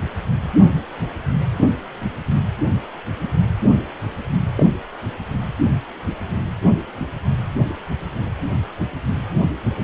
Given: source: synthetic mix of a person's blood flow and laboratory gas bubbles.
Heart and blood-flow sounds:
Doppler ultrasound of blood flow; precordium
4.55-4.67 s: bubbles
From the record:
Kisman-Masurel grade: 112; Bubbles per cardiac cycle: 1 to 2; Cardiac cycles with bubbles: 1 to 10%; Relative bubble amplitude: moderate (0.250 to 0.450); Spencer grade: 1 (occasional bubble signal discernible with the cardiac motion signal, with majority of cardiac periods free of bubbles); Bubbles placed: anywhere in the cardiac cycle

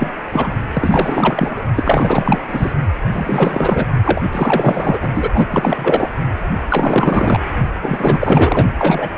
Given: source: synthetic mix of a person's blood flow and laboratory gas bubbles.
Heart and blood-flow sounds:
Doppler ultrasound of blood flow; precordium
0.00-0.11 s: bubbles
0.31-0.53 s: bubbles
0.73-1.62 s: bubbles
1.75-2.42 s: bubbles
2.48-2.73 s: bubbles
3.13-3.86 s: bubbles
4.04-4.21 s: bubbles
4.32-4.98 s: bubbles
5.01-5.09 s: bubbles
5.14-5.29 s: bubbles
5.33-5.46 s: bubbles
5.50-6.08 s: bubbles
6.69-7.40 s: bubbles
7.82-8.66 s: bubbles
8.78-9.09 s: bubbles
From the record:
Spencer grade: 4 (maximum detectable bubble signal sounding continuously throughout systole and diastole of every cardiac period, and overriding the amplitude of the normal cardiac signals); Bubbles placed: only in the low amplitude regions of the cardiac cycle

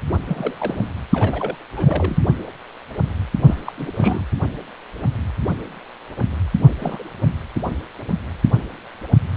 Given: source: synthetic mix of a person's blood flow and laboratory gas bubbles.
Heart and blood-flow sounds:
Doppler ultrasound of blood flow; precordium
0.28-0.82 s: bubbles
1.12-1.56 s: bubbles
1.77-2.23 s: bubbles
3.46-3.72 s: bubbles
3.76-3.92 s: bubbles
3.98-4.25 s: bubbles
6.79-7.04 s: bubbles
From the record:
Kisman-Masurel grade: 221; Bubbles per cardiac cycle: several, 3 to 8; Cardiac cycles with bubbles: 10 to 50%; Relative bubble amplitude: barely perceptible (0.100 to 0.250); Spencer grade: 2 (many but less than half of the cardiac periods contain bubble signals, singularly or in groups); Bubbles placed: anywhere in the cardiac cycle

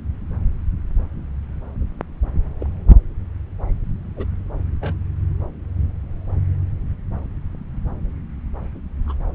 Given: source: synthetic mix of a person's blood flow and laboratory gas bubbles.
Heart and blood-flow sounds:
Doppler ultrasound of blood flow; subclavian vein
2.60-2.67 s: bubbles
4.17-4.26 s: bubbles
4.82-4.94 s: bubbles
9.06-9.14 s: bubbles
From the record:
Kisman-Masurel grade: 121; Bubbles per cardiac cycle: 1 to 2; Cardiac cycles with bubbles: 10 to 50%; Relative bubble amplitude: barely perceptible (0.100 to 0.250); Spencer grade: 2 (many but less than half of the cardiac periods contain bubble signals, singularly or in groups); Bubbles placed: anywhere in the cardiac cycle

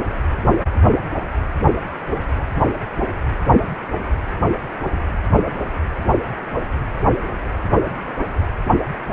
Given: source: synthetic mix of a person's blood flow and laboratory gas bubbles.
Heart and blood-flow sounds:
Doppler ultrasound of blood flow; precordium
no bubbles
From the record:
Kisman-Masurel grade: 000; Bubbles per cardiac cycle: 0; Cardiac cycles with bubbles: 0%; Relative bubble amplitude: no bubbles discernible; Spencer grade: 0 (complete lack of bubble signals)

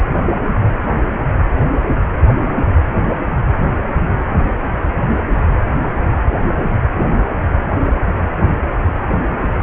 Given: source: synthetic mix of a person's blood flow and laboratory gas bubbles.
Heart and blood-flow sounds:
Doppler ultrasound of blood flow; precordium
no bubbles
From the record:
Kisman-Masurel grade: 000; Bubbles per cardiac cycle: 0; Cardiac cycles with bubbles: 0%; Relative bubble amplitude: no bubbles discernible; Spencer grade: 0 (complete lack of bubble signals)

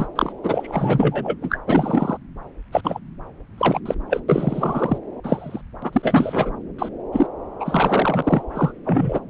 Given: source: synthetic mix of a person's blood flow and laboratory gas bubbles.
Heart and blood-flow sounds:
Doppler ultrasound of blood flow; subclavian vein
0.00-0.07 s: bubbles
0.15-0.33 s: bubbles
0.43-1.36 s: bubbles
1.41-1.59 s: bubbles
1.67-2.17 s: bubbles
2.72-2.81 s: bubbles
2.83-2.99 s: bubbles
3.57-3.80 s: bubbles
3.85-3.94 s: bubbles
4.09-4.20 s: bubbles
4.28-4.98 s: bubbles
5.24-5.61 s: bubbles
5.82-5.90 s: bubbles
5.93-6.52 s: bubbles
6.78-6.89 s: bubbles
7.12-7.27 s: bubbles
7.60-8.42 s: bubbles
8.54-8.72 s: bubbles
8.85-9.20 s: bubbles
From the record:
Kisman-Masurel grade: 343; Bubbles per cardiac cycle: rolling drumbeat, 9 or more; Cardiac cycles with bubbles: 100%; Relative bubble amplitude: loud (0.450 to 0.775); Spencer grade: 3 (all of the cardiac periods contain showers or single bubble signals, but not dominating or overriding the cardiac motion signals); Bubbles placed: anywhere in the cardiac cycle

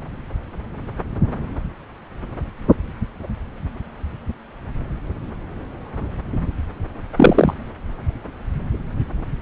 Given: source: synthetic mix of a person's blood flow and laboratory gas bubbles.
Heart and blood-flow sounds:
Doppler ultrasound of blood flow; subclavian vein
7.16-7.54 s: bubbles
From the record:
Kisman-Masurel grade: 113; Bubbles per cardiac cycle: 1 to 2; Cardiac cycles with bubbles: 1 to 10%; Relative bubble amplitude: loud (0.450 to 0.775); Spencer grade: 1 (occasional bubble signal discernible with the cardiac motion signal, with majority of cardiac periods free of bubbles); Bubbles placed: anywhere in the cardiac cycle

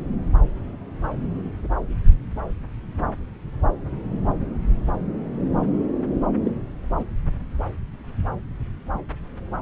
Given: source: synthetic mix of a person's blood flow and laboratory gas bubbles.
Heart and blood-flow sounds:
Doppler ultrasound of blood flow; subclavian vein
6.45-6.51 s: bubbles
6.96-7.04 s: bubbles
From the record:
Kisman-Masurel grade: 111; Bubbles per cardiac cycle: 1 to 2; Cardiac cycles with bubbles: 1 to 10%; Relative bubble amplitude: barely perceptible (0.100 to 0.250); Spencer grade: 1 (occasional bubble signal discernible with the cardiac motion signal, with majority of cardiac periods free of bubbles); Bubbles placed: anywhere in the cardiac cycle

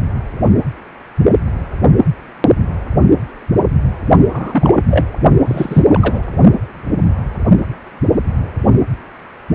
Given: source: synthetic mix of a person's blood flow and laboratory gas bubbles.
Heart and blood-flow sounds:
Doppler ultrasound of blood flow; precordium
4.28-4.81 s: bubbles
4.90-5.06 s: bubbles
5.45-5.82 s: bubbles
5.88-6.21 s: bubbles
From the record:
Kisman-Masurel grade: 223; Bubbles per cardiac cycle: several, 3 to 8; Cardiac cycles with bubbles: 10 to 50%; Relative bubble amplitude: loud (0.450 to 0.775); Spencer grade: 2 (many but less than half of the cardiac periods contain bubble signals, singularly or in groups); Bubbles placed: only in the low amplitude regions of the cardiac cycle

